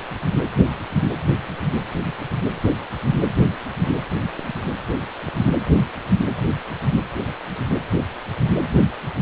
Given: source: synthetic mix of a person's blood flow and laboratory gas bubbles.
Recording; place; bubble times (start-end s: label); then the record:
Doppler ultrasound of blood flow; precordium
no bubbles
From the record:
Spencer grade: 0 (complete lack of bubble signals)